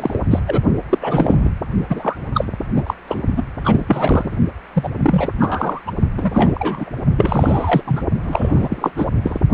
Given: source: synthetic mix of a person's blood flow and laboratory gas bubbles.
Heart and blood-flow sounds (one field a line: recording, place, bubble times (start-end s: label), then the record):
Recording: Doppler ultrasound of blood flow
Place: precordium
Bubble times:
0.00-0.22 s: bubbles
0.30-0.41 s: bubbles
0.47-0.62 s: bubbles
0.89-1.49 s: bubbles
1.89-2.16 s: bubbles
2.34-2.45 s: bubbles
2.75-2.83 s: bubbles
2.87-2.94 s: bubbles
3.08-3.22 s: bubbles
3.35-3.43 s: bubbles
3.64-3.85 s: bubbles
3.88-4.36 s: bubbles
4.74-4.92 s: bubbles
4.96-5.33 s: bubbles
5.39-5.81 s: bubbles
5.86-5.91 s: bubbles
6.17-6.90 s: bubbles
7.17-7.83 s: bubbles
7.87-8.01 s: bubbles
8.23-8.91 s: bubbles
8.96-9.07 s: bubbles
9.22-9.40 s: bubbles
From the record:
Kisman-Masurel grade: 333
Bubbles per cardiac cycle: rolling drumbeat, 9 or more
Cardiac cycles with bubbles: 50 to 99%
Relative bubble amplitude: loud (0.450 to 0.775)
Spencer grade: 3 (all of the cardiac periods contain showers or single bubble signals, but not dominating or overriding the cardiac motion signals)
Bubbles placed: only in the low amplitude regions of the cardiac cycle